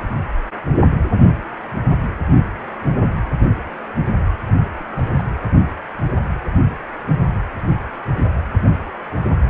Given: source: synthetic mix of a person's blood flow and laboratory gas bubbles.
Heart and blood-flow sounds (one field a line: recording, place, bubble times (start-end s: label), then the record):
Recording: Doppler ultrasound of blood flow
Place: precordium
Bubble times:
4.47-4.71 s: bubbles
4.79-4.83 s: bubbles
4.96-5.10 s: bubbles
5.17-5.24 s: bubbles
From the record:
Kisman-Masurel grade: 211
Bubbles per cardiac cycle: several, 3 to 8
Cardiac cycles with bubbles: 1 to 10%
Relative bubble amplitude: barely perceptible (0.100 to 0.250)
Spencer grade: 1 (occasional bubble signal discernible with the cardiac motion signal, with majority of cardiac periods free of bubbles)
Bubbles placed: anywhere in the cardiac cycle